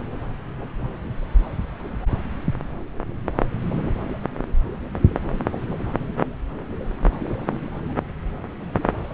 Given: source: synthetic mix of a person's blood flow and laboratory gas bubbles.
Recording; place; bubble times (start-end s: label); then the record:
Doppler ultrasound of blood flow; subclavian vein
no bubbles
From the record:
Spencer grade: 0 (complete lack of bubble signals)